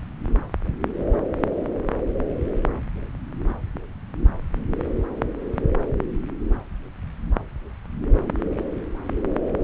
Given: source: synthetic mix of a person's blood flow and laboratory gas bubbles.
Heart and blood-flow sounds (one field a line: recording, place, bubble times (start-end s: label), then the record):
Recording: Doppler ultrasound of blood flow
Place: subclavian vein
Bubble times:
no bubbles
From the record:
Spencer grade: 0 (complete lack of bubble signals)